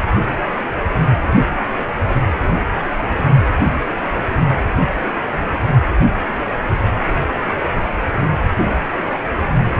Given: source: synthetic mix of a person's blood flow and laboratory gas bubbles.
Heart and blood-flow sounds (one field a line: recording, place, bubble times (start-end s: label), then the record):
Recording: Doppler ultrasound of blood flow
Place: precordium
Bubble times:
no bubbles
From the record:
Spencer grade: 0 (complete lack of bubble signals)